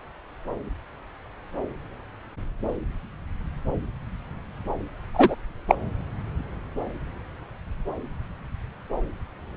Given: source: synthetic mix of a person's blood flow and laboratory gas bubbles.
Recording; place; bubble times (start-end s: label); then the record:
Doppler ultrasound of blood flow; subclavian vein
5.13-5.36 s: bubbles
5.68-5.75 s: bubbles
From the record:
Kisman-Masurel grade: 213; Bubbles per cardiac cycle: several, 3 to 8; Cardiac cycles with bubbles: 1 to 10%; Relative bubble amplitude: loud (0.450 to 0.775); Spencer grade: 1 (occasional bubble signal discernible with the cardiac motion signal, with majority of cardiac periods free of bubbles); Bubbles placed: anywhere in the cardiac cycle